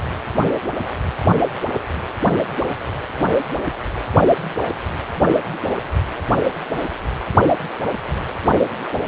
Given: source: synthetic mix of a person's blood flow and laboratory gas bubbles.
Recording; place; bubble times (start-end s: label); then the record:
Doppler ultrasound of blood flow; precordium
no bubbles
From the record:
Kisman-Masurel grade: 000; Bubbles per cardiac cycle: 0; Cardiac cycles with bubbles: 0%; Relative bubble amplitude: no bubbles discernible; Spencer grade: 0 (complete lack of bubble signals)